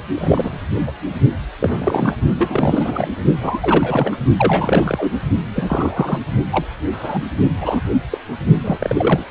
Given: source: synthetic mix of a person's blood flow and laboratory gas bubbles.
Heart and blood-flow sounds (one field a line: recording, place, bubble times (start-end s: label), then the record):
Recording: Doppler ultrasound of blood flow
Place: precordium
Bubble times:
0.14-0.60 s: bubbles
0.86-0.91 s: bubbles
1.59-2.15 s: bubbles
2.38-3.09 s: bubbles
3.41-4.17 s: bubbles
4.37-5.14 s: bubbles
5.55-6.18 s: bubbles
6.51-6.67 s: bubbles
6.92-7.22 s: bubbles
7.60-7.81 s: bubbles
8.11-8.18 s: bubbles
8.54-9.25 s: bubbles
From the record:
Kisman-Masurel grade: 242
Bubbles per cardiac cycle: several, 3 to 8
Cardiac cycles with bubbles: 100%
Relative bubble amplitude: moderate (0.250 to 0.450)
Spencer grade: 3 (all of the cardiac periods contain showers or single bubble signals, but not dominating or overriding the cardiac motion signals)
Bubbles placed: only in the low amplitude regions of the cardiac cycle